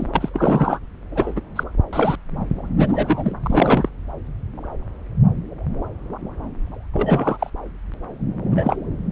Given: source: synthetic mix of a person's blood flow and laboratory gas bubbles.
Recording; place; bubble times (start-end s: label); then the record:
Doppler ultrasound of blood flow; subclavian vein
0.00-0.08 s: bubbles
0.13-0.79 s: bubbles
1.11-1.41 s: bubbles
1.56-1.64 s: bubbles
1.92-2.16 s: bubbles
2.77-3.33 s: bubbles
3.42-3.89 s: bubbles
6.93-7.50 s: bubbles
8.51-8.76 s: bubbles
From the record:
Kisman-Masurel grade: 232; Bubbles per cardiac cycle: several, 3 to 8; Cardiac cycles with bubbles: 50 to 99%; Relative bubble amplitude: moderate (0.250 to 0.450); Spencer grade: 3 (all of the cardiac periods contain showers or single bubble signals, but not dominating or overriding the cardiac motion signals); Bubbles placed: anywhere in the cardiac cycle